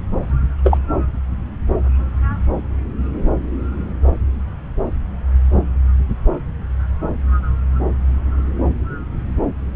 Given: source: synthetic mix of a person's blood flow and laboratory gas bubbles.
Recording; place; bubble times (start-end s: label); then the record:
Doppler ultrasound of blood flow; subclavian vein
0.63-0.78 s: bubbles
From the record:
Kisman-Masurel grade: 113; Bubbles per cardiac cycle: 1 to 2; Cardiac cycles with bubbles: 1 to 10%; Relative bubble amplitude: loud (0.450 to 0.775); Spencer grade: 1 (occasional bubble signal discernible with the cardiac motion signal, with majority of cardiac periods free of bubbles); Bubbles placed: anywhere in the cardiac cycle